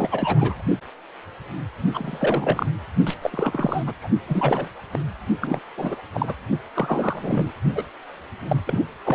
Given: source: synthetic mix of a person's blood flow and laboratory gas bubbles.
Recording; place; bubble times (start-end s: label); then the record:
Doppler ultrasound of blood flow; precordium
0.00-0.09 s: bubbles
0.11-0.62 s: bubbles
1.94-2.66 s: bubbles
3.06-3.15 s: bubbles
3.22-3.84 s: bubbles
3.86-3.94 s: bubbles
4.01-4.07 s: bubbles
4.27-4.68 s: bubbles
4.92-5.00 s: bubbles
5.41-5.60 s: bubbles
5.77-5.95 s: bubbles
6.13-6.34 s: bubbles
6.74-7.51 s: bubbles
7.75-7.84 s: bubbles
8.48-8.60 s: bubbles
8.67-8.84 s: bubbles
9.05-9.15 s: bubbles
From the record:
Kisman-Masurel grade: 332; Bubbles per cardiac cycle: rolling drumbeat, 9 or more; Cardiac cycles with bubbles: 50 to 99%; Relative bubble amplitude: moderate (0.250 to 0.450); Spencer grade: 3 (all of the cardiac periods contain showers or single bubble signals, but not dominating or overriding the cardiac motion signals); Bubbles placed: only in the low amplitude regions of the cardiac cycle